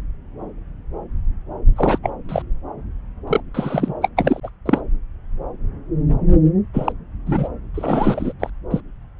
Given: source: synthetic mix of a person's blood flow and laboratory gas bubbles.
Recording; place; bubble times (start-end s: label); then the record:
Doppler ultrasound of blood flow; subclavian vein
1.76-1.99 s: bubbles
2.03-2.10 s: bubbles
2.28-2.42 s: bubbles
3.27-3.40 s: bubbles
3.54-3.94 s: bubbles
4.01-4.08 s: bubbles
4.17-4.40 s: bubbles
4.43-4.50 s: bubbles
4.66-4.81 s: bubbles
6.74-6.92 s: bubbles
7.27-7.49 s: bubbles
7.74-8.33 s: bubbles
8.39-8.50 s: bubbles
8.71-8.80 s: bubbles
From the record:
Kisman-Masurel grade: 222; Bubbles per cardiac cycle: several, 3 to 8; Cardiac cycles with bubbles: 10 to 50%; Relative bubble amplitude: moderate (0.250 to 0.450); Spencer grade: 2 (many but less than half of the cardiac periods contain bubble signals, singularly or in groups); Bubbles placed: anywhere in the cardiac cycle